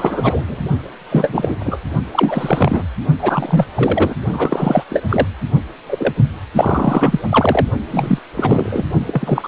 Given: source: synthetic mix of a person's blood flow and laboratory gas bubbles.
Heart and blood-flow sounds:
Doppler ultrasound of blood flow; precordium
0.00-0.62 s: bubbles
1.11-1.55 s: bubbles
1.59-1.79 s: bubbles
2.12-2.87 s: bubbles
3.19-3.66 s: bubbles
3.75-4.14 s: bubbles
4.31-4.83 s: bubbles
4.89-5.03 s: bubbles
5.09-5.27 s: bubbles
5.88-6.13 s: bubbles
6.55-7.19 s: bubbles
7.29-7.66 s: bubbles
7.88-8.19 s: bubbles
8.36-8.84 s: bubbles
9.06-9.48 s: bubbles
From the record:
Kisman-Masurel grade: 343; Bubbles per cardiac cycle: rolling drumbeat, 9 or more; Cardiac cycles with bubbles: 100%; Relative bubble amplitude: loud (0.450 to 0.775); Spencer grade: 3 (all of the cardiac periods contain showers or single bubble signals, but not dominating or overriding the cardiac motion signals); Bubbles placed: only in the low amplitude regions of the cardiac cycle

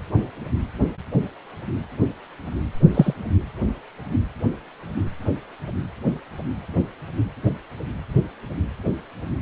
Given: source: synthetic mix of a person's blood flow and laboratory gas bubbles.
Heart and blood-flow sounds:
Doppler ultrasound of blood flow; precordium
2.94-3.14 s: bubbles
From the record:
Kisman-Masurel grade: 113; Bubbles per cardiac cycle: 1 to 2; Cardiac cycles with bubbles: 1 to 10%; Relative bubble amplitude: loud (0.450 to 0.775); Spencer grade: 1 (occasional bubble signal discernible with the cardiac motion signal, with majority of cardiac periods free of bubbles); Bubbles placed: anywhere in the cardiac cycle

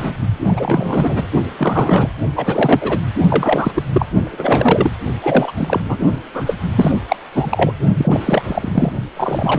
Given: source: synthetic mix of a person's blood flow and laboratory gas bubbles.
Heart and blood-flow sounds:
Doppler ultrasound of blood flow; precordium
0.00-0.19 s: bubbles
0.44-1.27 s: bubbles
1.58-2.09 s: bubbles
2.35-2.98 s: bubbles
3.29-3.81 s: bubbles
3.93-4.06 s: bubbles
4.23-4.90 s: bubbles
5.22-5.52 s: bubbles
5.55-5.80 s: bubbles
5.88-5.97 s: bubbles
6.34-6.56 s: bubbles
6.75-6.92 s: bubbles
7.08-7.16 s: bubbles
7.32-7.73 s: bubbles
7.98-8.92 s: bubbles
9.16-9.59 s: bubbles
From the record:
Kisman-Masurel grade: 343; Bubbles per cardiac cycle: rolling drumbeat, 9 or more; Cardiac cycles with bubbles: 100%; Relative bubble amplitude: loud (0.450 to 0.775); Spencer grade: 3 (all of the cardiac periods contain showers or single bubble signals, but not dominating or overriding the cardiac motion signals); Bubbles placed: only in the low amplitude regions of the cardiac cycle

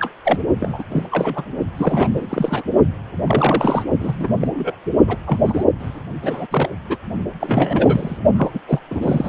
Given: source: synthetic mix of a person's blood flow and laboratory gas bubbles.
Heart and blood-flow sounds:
Doppler ultrasound of blood flow; precordium
0.00-0.10 s: bubbles
0.24-0.39 s: bubbles
0.60-0.83 s: bubbles
0.92-1.08 s: bubbles
1.11-1.49 s: bubbles
1.77-2.27 s: bubbles
2.29-2.63 s: bubbles
3.27-3.84 s: bubbles
4.00-4.47 s: bubbles
4.54-4.75 s: bubbles
5.07-5.16 s: bubbles
5.26-5.63 s: bubbles
5.79-6.01 s: bubbles
6.22-6.46 s: bubbles
6.51-6.67 s: bubbles
6.88-6.96 s: bubbles
7.40-8.18 s: bubbles
8.36-8.50 s: bubbles
8.53-8.60 s: bubbles
8.67-8.79 s: bubbles
8.90-9.29 s: bubbles
From the record:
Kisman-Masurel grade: 342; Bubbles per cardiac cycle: rolling drumbeat, 9 or more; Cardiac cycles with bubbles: 100%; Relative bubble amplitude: moderate (0.250 to 0.450); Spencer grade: 3 (all of the cardiac periods contain showers or single bubble signals, but not dominating or overriding the cardiac motion signals); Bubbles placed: only in the low amplitude regions of the cardiac cycle

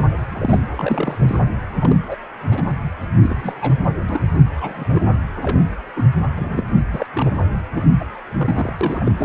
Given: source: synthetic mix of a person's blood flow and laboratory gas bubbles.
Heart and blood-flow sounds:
Doppler ultrasound of blood flow; precordium
0.31-0.62 s: bubbles
0.76-1.41 s: bubbles
1.81-1.96 s: bubbles
2.07-2.16 s: bubbles
2.50-2.63 s: bubbles
3.22-3.54 s: bubbles
3.61-3.74 s: bubbles
4.09-4.38 s: bubbles
4.56-5.02 s: bubbles
5.36-5.62 s: bubbles
5.96-6.04 s: bubbles
6.38-6.63 s: bubbles
6.93-7.06 s: bubbles
7.13-7.32 s: bubbles
7.72-7.87 s: bubbles
7.99-8.05 s: bubbles
8.38-8.73 s: bubbles
8.81-9.12 s: bubbles
9.18-9.25 s: bubbles
From the record:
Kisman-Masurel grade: 242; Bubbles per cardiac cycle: several, 3 to 8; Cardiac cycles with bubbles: 100%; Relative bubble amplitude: moderate (0.250 to 0.450); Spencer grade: 3 (all of the cardiac periods contain showers or single bubble signals, but not dominating or overriding the cardiac motion signals); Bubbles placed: anywhere in the cardiac cycle

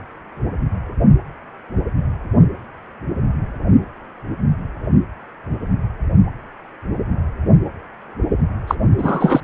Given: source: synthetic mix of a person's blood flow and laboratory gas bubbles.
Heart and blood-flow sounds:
Doppler ultrasound of blood flow; precordium
8.67-8.75 s: bubbles
8.97-9.40 s: bubbles
From the record:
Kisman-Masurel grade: 213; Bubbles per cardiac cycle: several, 3 to 8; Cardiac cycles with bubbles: 1 to 10%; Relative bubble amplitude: loud (0.450 to 0.775); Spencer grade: 1 (occasional bubble signal discernible with the cardiac motion signal, with majority of cardiac periods free of bubbles); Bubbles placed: anywhere in the cardiac cycle

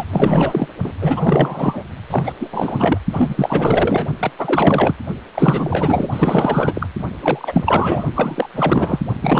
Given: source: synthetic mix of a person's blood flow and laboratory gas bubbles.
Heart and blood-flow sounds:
Doppler ultrasound of blood flow; precordium
0.00-0.04 s: bubbles
0.11-0.68 s: bubbles
0.84-0.94 s: bubbles
1.02-1.83 s: bubbles
2.10-2.32 s: bubbles
2.40-2.48 s: bubbles
2.52-2.97 s: bubbles
3.12-4.06 s: bubbles
4.20-4.32 s: bubbles
4.39-4.96 s: bubbles
5.35-6.08 s: bubbles
6.12-6.87 s: bubbles
7.22-8.04 s: bubbles
8.15-8.49 s: bubbles
8.54-8.99 s: bubbles
9.21-9.40 s: bubbles
From the record:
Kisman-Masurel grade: 444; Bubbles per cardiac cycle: continuous sound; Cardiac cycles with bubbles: 100%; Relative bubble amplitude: maximal (0.775 to 0.999); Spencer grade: 4 (maximum detectable bubble signal sounding continuously throughout systole and diastole of every cardiac period, and overriding the amplitude of the normal cardiac signals); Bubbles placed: only in the low amplitude regions of the cardiac cycle

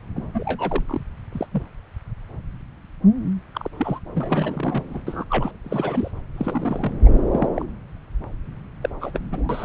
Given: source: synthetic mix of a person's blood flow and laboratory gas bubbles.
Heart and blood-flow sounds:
Doppler ultrasound of blood flow; subclavian vein
0.16-0.26 s: bubbles
0.34-1.03 s: bubbles
1.31-1.46 s: bubbles
1.52-1.62 s: bubbles
3.55-3.68 s: bubbles
3.78-4.00 s: bubbles
4.15-5.03 s: bubbles
5.07-5.25 s: bubbles
5.30-5.51 s: bubbles
5.64-6.11 s: bubbles
6.38-6.96 s: bubbles
7.05-7.10 s: bubbles
7.31-7.49 s: bubbles
7.56-7.66 s: bubbles
8.82-8.89 s: bubbles
9.00-9.19 s: bubbles
9.31-9.65 s: bubbles
From the record:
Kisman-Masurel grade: 232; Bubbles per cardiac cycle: several, 3 to 8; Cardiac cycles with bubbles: 50 to 99%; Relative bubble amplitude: moderate (0.250 to 0.450); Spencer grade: 3 (all of the cardiac periods contain showers or single bubble signals, but not dominating or overriding the cardiac motion signals); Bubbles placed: anywhere in the cardiac cycle

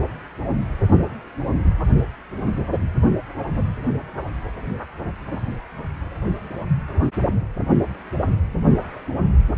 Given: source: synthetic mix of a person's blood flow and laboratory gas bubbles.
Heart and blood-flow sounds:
Doppler ultrasound of blood flow; precordium
no bubbles
From the record:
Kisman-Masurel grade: 000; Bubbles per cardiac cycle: 0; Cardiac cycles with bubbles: 0%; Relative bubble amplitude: no bubbles discernible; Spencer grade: 0 (complete lack of bubble signals)

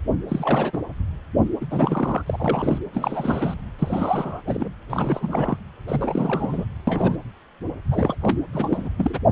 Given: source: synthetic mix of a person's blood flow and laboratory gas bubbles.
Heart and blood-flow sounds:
Doppler ultrasound of blood flow; precordium
0.29-0.81 s: bubbles
1.60-1.66 s: bubbles
1.70-2.22 s: bubbles
2.26-2.79 s: bubbles
2.93-3.54 s: bubbles
3.79-4.41 s: bubbles
4.47-4.69 s: bubbles
4.90-5.57 s: bubbles
5.88-6.65 s: bubbles
6.87-7.19 s: bubbles
7.91-8.15 s: bubbles
8.21-8.38 s: bubbles
8.53-8.89 s: bubbles
8.97-9.18 s: bubbles
From the record:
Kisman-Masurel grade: 332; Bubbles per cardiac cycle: rolling drumbeat, 9 or more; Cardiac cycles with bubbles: 50 to 99%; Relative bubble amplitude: moderate (0.250 to 0.450); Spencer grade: 3 (all of the cardiac periods contain showers or single bubble signals, but not dominating or overriding the cardiac motion signals); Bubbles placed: anywhere in the cardiac cycle

